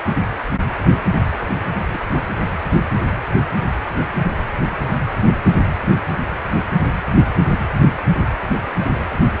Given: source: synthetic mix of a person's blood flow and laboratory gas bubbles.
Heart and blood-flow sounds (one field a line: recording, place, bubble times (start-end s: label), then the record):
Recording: Doppler ultrasound of blood flow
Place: precordium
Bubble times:
1.93-2.02 s: bubbles
From the record:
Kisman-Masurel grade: 111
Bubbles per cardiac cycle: 1 to 2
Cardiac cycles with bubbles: 1 to 10%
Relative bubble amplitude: barely perceptible (0.100 to 0.250)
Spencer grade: 1 (occasional bubble signal discernible with the cardiac motion signal, with majority of cardiac periods free of bubbles)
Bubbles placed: anywhere in the cardiac cycle